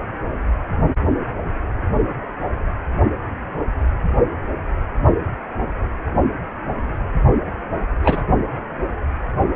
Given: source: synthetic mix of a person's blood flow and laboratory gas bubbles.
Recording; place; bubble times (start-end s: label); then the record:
Doppler ultrasound of blood flow; precordium
8.03-8.25 s: bubbles
From the record:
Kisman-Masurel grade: 213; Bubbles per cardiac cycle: several, 3 to 8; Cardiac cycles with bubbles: 1 to 10%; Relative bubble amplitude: loud (0.450 to 0.775); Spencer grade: 1 (occasional bubble signal discernible with the cardiac motion signal, with majority of cardiac periods free of bubbles); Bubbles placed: only in the low amplitude regions of the cardiac cycle